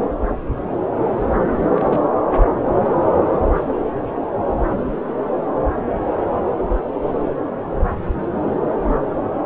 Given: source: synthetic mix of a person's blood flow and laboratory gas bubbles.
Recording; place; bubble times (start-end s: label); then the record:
Doppler ultrasound of blood flow; subclavian vein
1.59-2.10 s: bubbles
From the record:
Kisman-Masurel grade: 211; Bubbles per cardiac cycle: several, 3 to 8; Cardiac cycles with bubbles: 1 to 10%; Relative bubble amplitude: barely perceptible (0.100 to 0.250); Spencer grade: 1 (occasional bubble signal discernible with the cardiac motion signal, with majority of cardiac periods free of bubbles); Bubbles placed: anywhere in the cardiac cycle